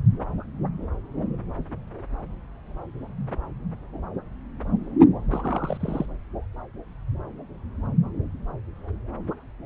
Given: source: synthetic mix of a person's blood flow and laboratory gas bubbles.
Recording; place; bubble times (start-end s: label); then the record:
Doppler ultrasound of blood flow; subclavian vein
5.31-6.05 s: bubbles
From the record:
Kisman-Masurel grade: 211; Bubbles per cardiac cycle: several, 3 to 8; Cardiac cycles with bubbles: 1 to 10%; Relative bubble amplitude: barely perceptible (0.100 to 0.250); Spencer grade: 1 (occasional bubble signal discernible with the cardiac motion signal, with majority of cardiac periods free of bubbles); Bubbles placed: anywhere in the cardiac cycle